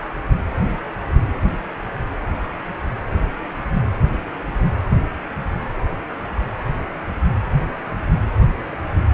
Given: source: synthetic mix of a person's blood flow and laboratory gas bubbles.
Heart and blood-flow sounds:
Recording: Doppler ultrasound of blood flow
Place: precordium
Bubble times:
no bubbles
From the record:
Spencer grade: 0 (complete lack of bubble signals)

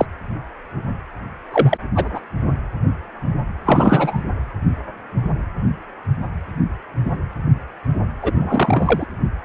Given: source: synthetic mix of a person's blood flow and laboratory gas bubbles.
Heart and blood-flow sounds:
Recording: Doppler ultrasound of blood flow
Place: precordium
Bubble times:
0.00-0.05 s: bubbles
1.51-1.78 s: bubbles
1.95-2.20 s: bubbles
3.65-4.22 s: bubbles
8.21-8.33 s: bubbles
8.36-9.06 s: bubbles
From the record:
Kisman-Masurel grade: 223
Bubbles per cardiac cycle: several, 3 to 8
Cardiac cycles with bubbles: 10 to 50%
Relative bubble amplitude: loud (0.450 to 0.775)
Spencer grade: 2 (many but less than half of the cardiac periods contain bubble signals, singularly or in groups)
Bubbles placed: anywhere in the cardiac cycle

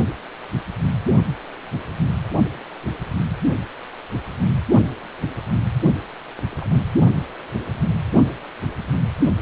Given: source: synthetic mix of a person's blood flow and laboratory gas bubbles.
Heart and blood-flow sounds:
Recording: Doppler ultrasound of blood flow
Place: precordium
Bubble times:
6.51-6.80 s: bubbles
From the record:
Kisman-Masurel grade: 111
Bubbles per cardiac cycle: 1 to 2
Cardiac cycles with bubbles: 1 to 10%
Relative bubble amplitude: barely perceptible (0.100 to 0.250)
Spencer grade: 1 (occasional bubble signal discernible with the cardiac motion signal, with majority of cardiac periods free of bubbles)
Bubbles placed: only in the low amplitude regions of the cardiac cycle

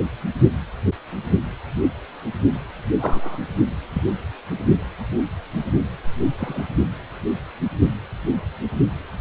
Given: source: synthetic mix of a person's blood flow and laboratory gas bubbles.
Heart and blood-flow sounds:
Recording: Doppler ultrasound of blood flow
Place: precordium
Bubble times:
2.99-3.38 s: bubbles
3.93-4.03 s: bubbles
6.38-6.68 s: bubbles
From the record:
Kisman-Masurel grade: 121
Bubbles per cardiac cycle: 1 to 2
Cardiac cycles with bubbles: 10 to 50%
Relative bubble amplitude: barely perceptible (0.100 to 0.250)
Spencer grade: 2 (many but less than half of the cardiac periods contain bubble signals, singularly or in groups)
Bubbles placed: only in the low amplitude regions of the cardiac cycle

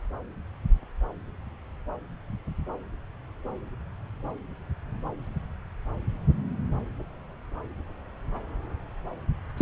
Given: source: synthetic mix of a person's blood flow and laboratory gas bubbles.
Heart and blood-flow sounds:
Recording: Doppler ultrasound of blood flow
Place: subclavian vein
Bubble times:
9.57-9.62 s: bubbles
From the record:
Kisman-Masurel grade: 212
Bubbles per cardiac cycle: several, 3 to 8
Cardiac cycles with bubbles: 1 to 10%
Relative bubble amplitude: moderate (0.250 to 0.450)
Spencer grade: 1 (occasional bubble signal discernible with the cardiac motion signal, with majority of cardiac periods free of bubbles)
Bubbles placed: anywhere in the cardiac cycle

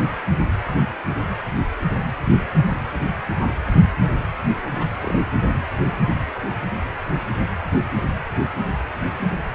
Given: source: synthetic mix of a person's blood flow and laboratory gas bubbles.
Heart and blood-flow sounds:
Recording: Doppler ultrasound of blood flow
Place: precordium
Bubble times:
4.72-4.96 s: bubbles
5.00-5.20 s: bubbles
From the record:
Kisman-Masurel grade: 211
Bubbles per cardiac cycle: several, 3 to 8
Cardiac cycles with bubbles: 1 to 10%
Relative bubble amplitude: barely perceptible (0.100 to 0.250)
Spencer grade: 1 (occasional bubble signal discernible with the cardiac motion signal, with majority of cardiac periods free of bubbles)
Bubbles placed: anywhere in the cardiac cycle

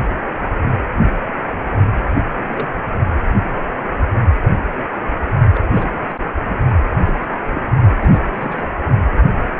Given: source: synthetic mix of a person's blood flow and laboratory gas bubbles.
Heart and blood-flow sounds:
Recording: Doppler ultrasound of blood flow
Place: precordium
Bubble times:
1.94-2.01 s: bubbles
2.11-2.15 s: bubbles
2.37-2.69 s: bubbles
5.54-5.61 s: bubbles
5.75-6.15 s: bubbles
6.89-7.38 s: bubbles
7.48-7.62 s: bubbles
7.99-8.23 s: bubbles
8.35-8.63 s: bubbles
From the record:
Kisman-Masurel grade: 221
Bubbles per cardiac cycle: several, 3 to 8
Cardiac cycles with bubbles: 10 to 50%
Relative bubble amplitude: barely perceptible (0.100 to 0.250)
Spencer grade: 2 (many but less than half of the cardiac periods contain bubble signals, singularly or in groups)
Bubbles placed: only in the low amplitude regions of the cardiac cycle

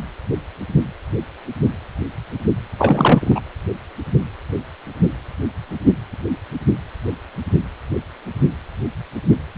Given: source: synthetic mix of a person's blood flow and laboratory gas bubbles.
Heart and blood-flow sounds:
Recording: Doppler ultrasound of blood flow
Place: precordium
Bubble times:
2.78-3.42 s: bubbles
From the record:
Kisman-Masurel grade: 213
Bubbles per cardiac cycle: several, 3 to 8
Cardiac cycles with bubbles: 1 to 10%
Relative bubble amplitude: loud (0.450 to 0.775)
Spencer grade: 1 (occasional bubble signal discernible with the cardiac motion signal, with majority of cardiac periods free of bubbles)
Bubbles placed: anywhere in the cardiac cycle

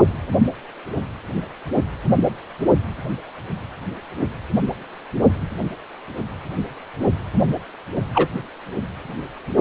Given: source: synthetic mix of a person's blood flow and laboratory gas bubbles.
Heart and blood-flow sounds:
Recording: Doppler ultrasound of blood flow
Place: precordium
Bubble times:
8.14-8.28 s: bubbles
From the record:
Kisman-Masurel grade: 113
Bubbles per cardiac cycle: 1 to 2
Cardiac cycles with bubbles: 1 to 10%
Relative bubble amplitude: loud (0.450 to 0.775)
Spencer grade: 1 (occasional bubble signal discernible with the cardiac motion signal, with majority of cardiac periods free of bubbles)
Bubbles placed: only in the low amplitude regions of the cardiac cycle

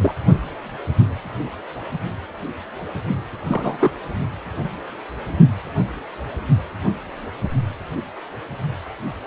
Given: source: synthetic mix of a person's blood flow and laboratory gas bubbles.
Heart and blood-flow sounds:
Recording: Doppler ultrasound of blood flow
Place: precordium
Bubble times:
0.01-0.15 s: bubbles
3.47-3.95 s: bubbles
From the record:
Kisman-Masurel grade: 222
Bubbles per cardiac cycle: several, 3 to 8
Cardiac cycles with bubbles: 10 to 50%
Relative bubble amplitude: moderate (0.250 to 0.450)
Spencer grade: 2 (many but less than half of the cardiac periods contain bubble signals, singularly or in groups)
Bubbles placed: only in the low amplitude regions of the cardiac cycle

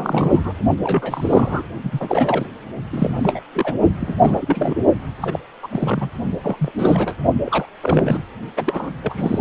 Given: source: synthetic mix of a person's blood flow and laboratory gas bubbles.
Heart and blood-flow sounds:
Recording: Doppler ultrasound of blood flow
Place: precordium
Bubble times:
0.00-0.52 s: bubbles
0.80-1.63 s: bubbles
1.83-2.48 s: bubbles
2.92-3.42 s: bubbles
3.52-3.75 s: bubbles
4.00-4.16 s: bubbles
4.21-4.75 s: bubbles
5.21-5.39 s: bubbles
5.62-6.09 s: bubbles
6.43-6.72 s: bubbles
6.79-7.13 s: bubbles
7.44-7.66 s: bubbles
7.83-8.21 s: bubbles
8.57-8.91 s: bubbles
9.02-9.41 s: bubbles
From the record:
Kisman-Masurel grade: 342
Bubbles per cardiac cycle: rolling drumbeat, 9 or more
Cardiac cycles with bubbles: 100%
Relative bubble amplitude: moderate (0.250 to 0.450)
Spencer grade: 3 (all of the cardiac periods contain showers or single bubble signals, but not dominating or overriding the cardiac motion signals)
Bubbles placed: only in the low amplitude regions of the cardiac cycle

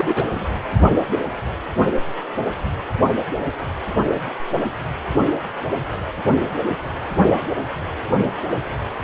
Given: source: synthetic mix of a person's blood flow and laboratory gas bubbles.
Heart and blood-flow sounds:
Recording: Doppler ultrasound of blood flow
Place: precordium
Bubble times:
0.00-0.27 s: bubbles
0.35-0.46 s: bubbles
From the record:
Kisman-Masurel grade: 212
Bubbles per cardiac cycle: several, 3 to 8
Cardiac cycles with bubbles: 1 to 10%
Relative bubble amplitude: moderate (0.250 to 0.450)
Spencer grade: 1 (occasional bubble signal discernible with the cardiac motion signal, with majority of cardiac periods free of bubbles)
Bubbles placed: only in the low amplitude regions of the cardiac cycle

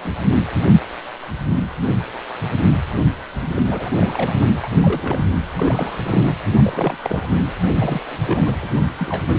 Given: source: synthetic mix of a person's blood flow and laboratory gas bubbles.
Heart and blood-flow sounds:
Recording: Doppler ultrasound of blood flow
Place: precordium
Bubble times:
0.03-0.44 s: bubbles
3.33-3.47 s: bubbles
3.50-3.63 s: bubbles
3.67-4.46 s: bubbles
4.56-5.26 s: bubbles
5.55-6.34 s: bubbles
6.54-6.97 s: bubbles
7.02-7.33 s: bubbles
7.79-8.00 s: bubbles
8.11-8.51 s: bubbles
8.62-8.71 s: bubbles
8.97-9.24 s: bubbles
9.28-9.36 s: bubbles
From the record:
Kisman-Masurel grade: 232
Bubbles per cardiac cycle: several, 3 to 8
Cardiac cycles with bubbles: 50 to 99%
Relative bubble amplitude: moderate (0.250 to 0.450)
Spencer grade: 3 (all of the cardiac periods contain showers or single bubble signals, but not dominating or overriding the cardiac motion signals)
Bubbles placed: anywhere in the cardiac cycle

